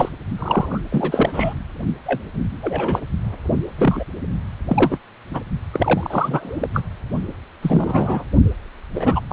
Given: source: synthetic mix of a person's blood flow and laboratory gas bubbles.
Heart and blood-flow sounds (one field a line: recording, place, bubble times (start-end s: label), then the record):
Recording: Doppler ultrasound of blood flow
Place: precordium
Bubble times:
0.00-0.09 s: bubbles
0.37-0.81 s: bubbles
0.92-1.54 s: bubbles
2.06-2.21 s: bubbles
2.62-3.00 s: bubbles
3.77-4.04 s: bubbles
4.68-4.98 s: bubbles
5.33-5.41 s: bubbles
5.73-6.67 s: bubbles
6.74-6.81 s: bubbles
7.62-8.23 s: bubbles
8.94-9.20 s: bubbles
9.28-9.33 s: bubbles
From the record:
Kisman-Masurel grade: 242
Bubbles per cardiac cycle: several, 3 to 8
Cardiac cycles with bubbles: 100%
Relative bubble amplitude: moderate (0.250 to 0.450)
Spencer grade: 3 (all of the cardiac periods contain showers or single bubble signals, but not dominating or overriding the cardiac motion signals)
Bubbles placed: only in the low amplitude regions of the cardiac cycle